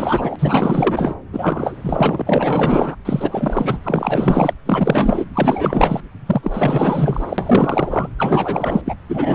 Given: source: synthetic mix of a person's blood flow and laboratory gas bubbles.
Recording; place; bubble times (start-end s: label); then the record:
Doppler ultrasound of blood flow; subclavian vein
0.00-0.36 s: bubbles
0.38-1.15 s: bubbles
1.32-2.22 s: bubbles
2.26-2.95 s: bubbles
3.04-3.78 s: bubbles
3.83-4.53 s: bubbles
4.65-5.29 s: bubbles
5.33-6.00 s: bubbles
6.26-8.09 s: bubbles
8.18-8.82 s: bubbles
8.85-8.95 s: bubbles
9.08-9.35 s: bubbles
From the record:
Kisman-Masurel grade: 444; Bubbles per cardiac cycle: continuous sound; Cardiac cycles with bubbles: 100%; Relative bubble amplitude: maximal (0.775 to 0.999); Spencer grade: 4 (maximum detectable bubble signal sounding continuously throughout systole and diastole of every cardiac period, and overriding the amplitude of the normal cardiac signals); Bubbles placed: anywhere in the cardiac cycle